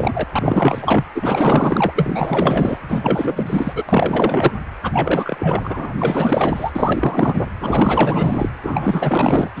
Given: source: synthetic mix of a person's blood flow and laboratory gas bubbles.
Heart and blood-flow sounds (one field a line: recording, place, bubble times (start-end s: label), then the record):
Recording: Doppler ultrasound of blood flow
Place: precordium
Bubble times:
0.00-0.23 s: bubbles
0.31-1.04 s: bubbles
1.15-2.78 s: bubbles
2.88-3.84 s: bubbles
3.88-4.54 s: bubbles
4.83-7.46 s: bubbles
7.60-8.49 s: bubbles
8.63-9.49 s: bubbles
9.55-9.60 s: bubbles
From the record:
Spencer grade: 4 (maximum detectable bubble signal sounding continuously throughout systole and diastole of every cardiac period, and overriding the amplitude of the normal cardiac signals)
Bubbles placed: anywhere in the cardiac cycle